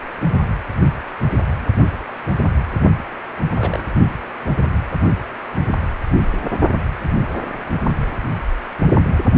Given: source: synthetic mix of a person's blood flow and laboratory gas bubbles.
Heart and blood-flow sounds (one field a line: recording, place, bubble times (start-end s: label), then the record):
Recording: Doppler ultrasound of blood flow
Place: precordium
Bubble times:
3.55-3.87 s: bubbles
From the record:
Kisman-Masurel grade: 221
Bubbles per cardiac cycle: several, 3 to 8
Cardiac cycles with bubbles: 10 to 50%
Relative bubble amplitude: barely perceptible (0.100 to 0.250)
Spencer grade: 2 (many but less than half of the cardiac periods contain bubble signals, singularly or in groups)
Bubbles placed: only in the low amplitude regions of the cardiac cycle